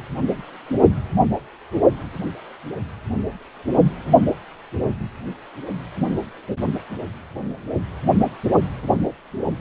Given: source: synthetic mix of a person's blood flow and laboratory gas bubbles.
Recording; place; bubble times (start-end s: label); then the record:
Doppler ultrasound of blood flow; precordium
no bubbles
From the record:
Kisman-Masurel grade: 000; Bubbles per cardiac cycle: 0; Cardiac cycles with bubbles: 0%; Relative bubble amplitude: no bubbles discernible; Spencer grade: 0 (complete lack of bubble signals)